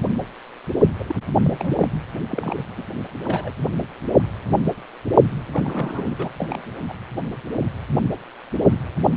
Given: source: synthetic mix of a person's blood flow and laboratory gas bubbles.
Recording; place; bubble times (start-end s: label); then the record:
Doppler ultrasound of blood flow; precordium
0.99-1.04 s: bubbles
1.08-1.15 s: bubbles
1.44-1.90 s: bubbles
2.28-2.54 s: bubbles
2.58-2.62 s: bubbles
2.77-2.86 s: bubbles
3.23-3.53 s: bubbles
5.52-6.16 s: bubbles
6.18-6.29 s: bubbles
6.38-6.61 s: bubbles
6.89-6.94 s: bubbles
From the record:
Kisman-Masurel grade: 221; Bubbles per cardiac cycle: several, 3 to 8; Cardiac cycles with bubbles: 10 to 50%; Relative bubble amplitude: barely perceptible (0.100 to 0.250); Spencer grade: 2 (many but less than half of the cardiac periods contain bubble signals, singularly or in groups); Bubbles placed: only in the low amplitude regions of the cardiac cycle